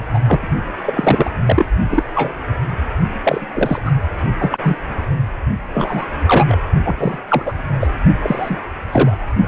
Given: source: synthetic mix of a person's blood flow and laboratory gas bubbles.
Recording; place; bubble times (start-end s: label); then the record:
Doppler ultrasound of blood flow; precordium
0.13-0.19 s: bubbles
0.26-0.50 s: bubbles
0.82-1.30 s: bubbles
1.46-1.66 s: bubbles
1.91-2.04 s: bubbles
2.15-2.34 s: bubbles
3.23-3.45 s: bubbles
3.54-3.80 s: bubbles
3.85-3.92 s: bubbles
4.39-4.58 s: bubbles
4.62-4.77 s: bubbles
5.73-6.07 s: bubbles
6.26-6.57 s: bubbles
6.84-7.18 s: bubbles
7.28-7.53 s: bubbles
7.81-7.89 s: bubbles
8.23-8.58 s: bubbles
8.92-9.18 s: bubbles
From the record:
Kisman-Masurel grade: 243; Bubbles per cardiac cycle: several, 3 to 8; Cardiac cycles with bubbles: 100%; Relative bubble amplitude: loud (0.450 to 0.775); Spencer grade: 3 (all of the cardiac periods contain showers or single bubble signals, but not dominating or overriding the cardiac motion signals); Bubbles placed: only in the low amplitude regions of the cardiac cycle